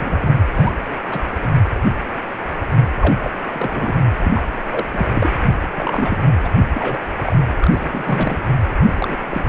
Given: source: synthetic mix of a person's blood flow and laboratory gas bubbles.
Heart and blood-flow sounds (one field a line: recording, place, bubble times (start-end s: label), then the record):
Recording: Doppler ultrasound of blood flow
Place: precordium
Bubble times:
0.00-0.45 s: bubbles
0.52-0.72 s: bubbles
1.10-1.24 s: bubbles
1.42-1.51 s: bubbles
3.00-3.31 s: bubbles
3.50-4.00 s: bubbles
4.25-4.43 s: bubbles
4.71-4.84 s: bubbles
4.92-5.07 s: bubbles
5.13-5.29 s: bubbles
5.74-6.19 s: bubbles
6.44-6.50 s: bubbles
6.75-7.00 s: bubbles
7.19-7.36 s: bubbles
7.58-8.40 s: bubbles
8.86-9.17 s: bubbles
9.29-9.45 s: bubbles
From the record:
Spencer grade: 3 (all of the cardiac periods contain showers or single bubble signals, but not dominating or overriding the cardiac motion signals)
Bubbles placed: anywhere in the cardiac cycle